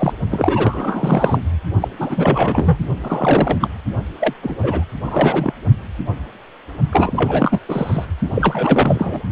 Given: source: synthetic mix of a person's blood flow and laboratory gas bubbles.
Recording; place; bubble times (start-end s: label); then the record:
Doppler ultrasound of blood flow; precordium
0.00-0.13 s: bubbles
0.30-1.42 s: bubbles
1.80-1.88 s: bubbles
1.99-2.79 s: bubbles
3.01-3.69 s: bubbles
4.20-4.34 s: bubbles
4.42-4.55 s: bubbles
4.62-4.85 s: bubbles
5.06-5.52 s: bubbles
6.92-7.59 s: bubbles
7.68-8.07 s: bubbles
8.18-9.24 s: bubbles
From the record:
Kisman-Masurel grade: 333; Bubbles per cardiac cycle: rolling drumbeat, 9 or more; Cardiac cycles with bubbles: 50 to 99%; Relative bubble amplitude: loud (0.450 to 0.775); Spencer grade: 3 (all of the cardiac periods contain showers or single bubble signals, but not dominating or overriding the cardiac motion signals); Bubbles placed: only in the low amplitude regions of the cardiac cycle